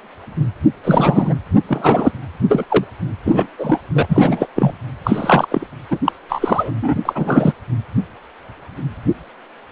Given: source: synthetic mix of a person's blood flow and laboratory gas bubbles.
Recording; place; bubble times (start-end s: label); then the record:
Doppler ultrasound of blood flow; precordium
0.83-1.34 s: bubbles
1.68-2.12 s: bubbles
2.48-2.66 s: bubbles
2.69-2.85 s: bubbles
3.25-3.47 s: bubbles
3.58-3.78 s: bubbles
3.95-4.05 s: bubbles
4.09-4.46 s: bubbles
4.55-4.72 s: bubbles
5.04-5.48 s: bubbles
5.50-5.67 s: bubbles
5.91-5.98 s: bubbles
6.04-6.12 s: bubbles
6.29-6.71 s: bubbles
6.82-6.95 s: bubbles
7.05-7.53 s: bubbles
From the record:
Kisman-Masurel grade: 233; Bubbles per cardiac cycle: several, 3 to 8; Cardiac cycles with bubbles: 50 to 99%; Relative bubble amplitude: loud (0.450 to 0.775); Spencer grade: 3 (all of the cardiac periods contain showers or single bubble signals, but not dominating or overriding the cardiac motion signals); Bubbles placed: anywhere in the cardiac cycle